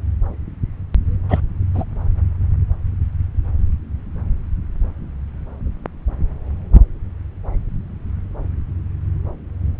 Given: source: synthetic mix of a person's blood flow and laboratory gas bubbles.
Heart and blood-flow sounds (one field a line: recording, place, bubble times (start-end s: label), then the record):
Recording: Doppler ultrasound of blood flow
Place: subclavian vein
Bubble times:
1.28-1.40 s: bubbles
1.74-1.84 s: bubbles
From the record:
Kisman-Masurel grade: 112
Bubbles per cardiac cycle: 1 to 2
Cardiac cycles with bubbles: 1 to 10%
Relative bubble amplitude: moderate (0.250 to 0.450)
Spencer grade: 1 (occasional bubble signal discernible with the cardiac motion signal, with majority of cardiac periods free of bubbles)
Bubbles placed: anywhere in the cardiac cycle